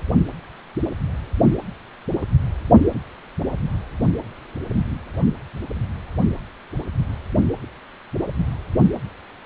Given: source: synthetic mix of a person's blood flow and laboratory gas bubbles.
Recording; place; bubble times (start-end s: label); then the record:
Doppler ultrasound of blood flow; precordium
no bubbles
From the record:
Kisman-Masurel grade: 000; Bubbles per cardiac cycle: 0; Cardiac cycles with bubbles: 0%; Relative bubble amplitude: no bubbles discernible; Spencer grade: 0 (complete lack of bubble signals)